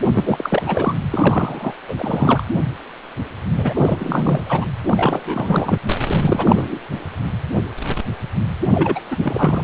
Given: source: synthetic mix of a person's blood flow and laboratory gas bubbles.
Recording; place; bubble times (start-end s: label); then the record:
Doppler ultrasound of blood flow; precordium
0.14-0.62 s: bubbles
0.66-0.94 s: bubbles
1.11-1.73 s: bubbles
1.88-1.95 s: bubbles
1.98-2.43 s: bubbles
3.57-4.67 s: bubbles
4.87-5.79 s: bubbles
6.08-6.79 s: bubbles
8.74-9.00 s: bubbles
9.11-9.16 s: bubbles
9.20-9.64 s: bubbles
From the record:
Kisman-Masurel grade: 333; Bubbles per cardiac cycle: rolling drumbeat, 9 or more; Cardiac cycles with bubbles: 50 to 99%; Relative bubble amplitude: loud (0.450 to 0.775); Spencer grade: 3 (all of the cardiac periods contain showers or single bubble signals, but not dominating or overriding the cardiac motion signals); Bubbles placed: anywhere in the cardiac cycle